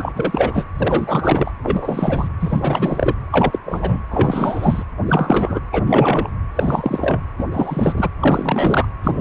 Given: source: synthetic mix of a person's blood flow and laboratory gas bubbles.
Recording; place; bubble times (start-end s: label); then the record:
Doppler ultrasound of blood flow; precordium
0.00-0.66 s: bubbles
0.78-1.52 s: bubbles
1.63-2.28 s: bubbles
2.40-3.15 s: bubbles
3.31-3.60 s: bubbles
3.65-4.02 s: bubbles
4.10-4.83 s: bubbles
5.06-5.60 s: bubbles
5.72-6.28 s: bubbles
6.55-7.21 s: bubbles
7.38-7.45 s: bubbles
7.52-8.09 s: bubbles
8.20-8.88 s: bubbles
9.03-9.21 s: bubbles
From the record:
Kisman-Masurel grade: 343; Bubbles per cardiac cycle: rolling drumbeat, 9 or more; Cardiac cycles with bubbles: 100%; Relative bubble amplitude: loud (0.450 to 0.775); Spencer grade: 3 (all of the cardiac periods contain showers or single bubble signals, but not dominating or overriding the cardiac motion signals); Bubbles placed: anywhere in the cardiac cycle